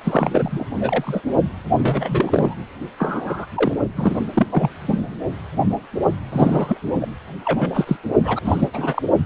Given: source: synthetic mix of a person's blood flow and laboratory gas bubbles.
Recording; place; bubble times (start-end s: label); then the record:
Doppler ultrasound of blood flow; precordium
0.03-0.65 s: bubbles
0.80-1.21 s: bubbles
1.76-2.55 s: bubbles
2.98-3.46 s: bubbles
3.54-3.74 s: bubbles
3.96-4.18 s: bubbles
4.33-4.47 s: bubbles
4.50-4.70 s: bubbles
4.80-5.17 s: bubbles
6.32-6.77 s: bubbles
7.01-7.08 s: bubbles
7.45-7.96 s: bubbles
8.23-8.39 s: bubbles
8.45-8.69 s: bubbles
8.73-9.02 s: bubbles
From the record:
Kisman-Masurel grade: 232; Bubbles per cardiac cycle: several, 3 to 8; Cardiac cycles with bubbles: 50 to 99%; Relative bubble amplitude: moderate (0.250 to 0.450); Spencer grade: 3 (all of the cardiac periods contain showers or single bubble signals, but not dominating or overriding the cardiac motion signals); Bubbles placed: anywhere in the cardiac cycle